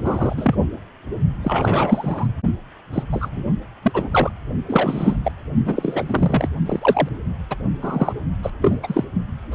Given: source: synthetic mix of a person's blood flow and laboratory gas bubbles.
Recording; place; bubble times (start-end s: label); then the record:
Doppler ultrasound of blood flow; precordium
0.04-0.55 s: bubbles
1.43-2.27 s: bubbles
2.92-3.03 s: bubbles
3.12-3.43 s: bubbles
3.82-4.09 s: bubbles
4.12-4.31 s: bubbles
4.66-5.17 s: bubbles
5.24-5.31 s: bubbles
5.65-6.49 s: bubbles
6.65-7.09 s: bubbles
7.50-7.56 s: bubbles
7.82-8.13 s: bubbles
8.43-8.51 s: bubbles
8.62-9.04 s: bubbles
9.51-9.55 s: bubbles
From the record:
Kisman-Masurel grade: 243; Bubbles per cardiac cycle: several, 3 to 8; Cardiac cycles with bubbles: 100%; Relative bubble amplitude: loud (0.450 to 0.775); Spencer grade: 3 (all of the cardiac periods contain showers or single bubble signals, but not dominating or overriding the cardiac motion signals); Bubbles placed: only in the low amplitude regions of the cardiac cycle